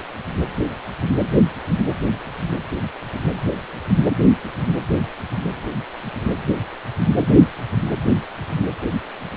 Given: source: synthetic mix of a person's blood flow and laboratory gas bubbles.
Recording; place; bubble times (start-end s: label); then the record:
Doppler ultrasound of blood flow; precordium
no bubbles
From the record:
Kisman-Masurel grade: 000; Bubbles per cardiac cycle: 0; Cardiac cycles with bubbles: 0%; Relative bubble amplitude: no bubbles discernible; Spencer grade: 0 (complete lack of bubble signals)